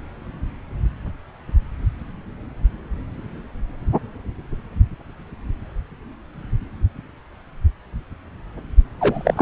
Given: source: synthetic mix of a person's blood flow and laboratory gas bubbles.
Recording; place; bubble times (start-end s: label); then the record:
Doppler ultrasound of blood flow; subclavian vein
9.00-9.42 s: bubbles
From the record:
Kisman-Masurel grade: 213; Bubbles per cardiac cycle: several, 3 to 8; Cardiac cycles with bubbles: 1 to 10%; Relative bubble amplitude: loud (0.450 to 0.775); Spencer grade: 1 (occasional bubble signal discernible with the cardiac motion signal, with majority of cardiac periods free of bubbles); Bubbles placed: anywhere in the cardiac cycle